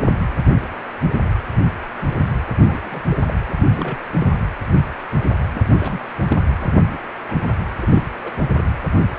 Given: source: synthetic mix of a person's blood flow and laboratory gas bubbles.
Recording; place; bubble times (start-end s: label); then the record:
Doppler ultrasound of blood flow; precordium
2.66-3.01 s: bubbles
3.10-3.23 s: bubbles
3.27-3.34 s: bubbles
3.46-3.60 s: bubbles
3.66-3.98 s: bubbles
4.19-4.26 s: bubbles
5.54-6.11 s: bubbles
6.28-6.38 s: bubbles
6.61-6.71 s: bubbles
6.80-6.98 s: bubbles
7.27-7.56 s: bubbles
7.79-8.02 s: bubbles
8.23-8.30 s: bubbles
8.55-8.62 s: bubbles
From the record:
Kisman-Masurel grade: 221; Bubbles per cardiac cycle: several, 3 to 8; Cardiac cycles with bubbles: 10 to 50%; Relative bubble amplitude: barely perceptible (0.100 to 0.250); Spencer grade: 2 (many but less than half of the cardiac periods contain bubble signals, singularly or in groups); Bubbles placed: anywhere in the cardiac cycle